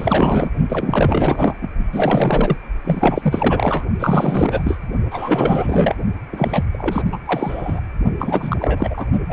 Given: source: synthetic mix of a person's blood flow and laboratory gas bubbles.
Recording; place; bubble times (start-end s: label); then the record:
Doppler ultrasound of blood flow; precordium
0.00-0.52 s: bubbles
0.69-1.55 s: bubbles
1.61-1.71 s: bubbles
1.93-2.57 s: bubbles
2.84-3.85 s: bubbles
3.99-4.78 s: bubbles
5.10-5.95 s: bubbles
6.32-6.64 s: bubbles
6.72-7.02 s: bubbles
7.12-7.18 s: bubbles
7.25-7.80 s: bubbles
8.19-9.06 s: bubbles
9.29-9.33 s: bubbles
From the record:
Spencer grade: 4 (maximum detectable bubble signal sounding continuously throughout systole and diastole of every cardiac period, and overriding the amplitude of the normal cardiac signals); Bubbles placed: only in the low amplitude regions of the cardiac cycle